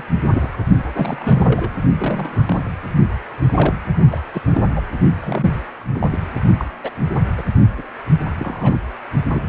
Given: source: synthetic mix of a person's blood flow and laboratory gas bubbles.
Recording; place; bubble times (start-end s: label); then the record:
Doppler ultrasound of blood flow; precordium
0.00-0.04 s: bubbles
0.24-0.49 s: bubbles
0.93-1.72 s: bubbles
1.97-2.46 s: bubbles
2.48-2.70 s: bubbles
3.48-3.78 s: bubbles
4.11-4.18 s: bubbles
4.33-4.42 s: bubbles
4.51-4.66 s: bubbles
4.75-4.82 s: bubbles
5.21-5.55 s: bubbles
5.94-6.19 s: bubbles
6.58-6.69 s: bubbles
6.83-6.90 s: bubbles
7.38-7.44 s: bubbles
7.77-7.83 s: bubbles
8.39-8.79 s: bubbles
9.28-9.41 s: bubbles
From the record:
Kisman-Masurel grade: 242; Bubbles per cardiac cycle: several, 3 to 8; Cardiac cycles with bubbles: 100%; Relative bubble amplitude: moderate (0.250 to 0.450); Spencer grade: 3 (all of the cardiac periods contain showers or single bubble signals, but not dominating or overriding the cardiac motion signals); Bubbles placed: only in the low amplitude regions of the cardiac cycle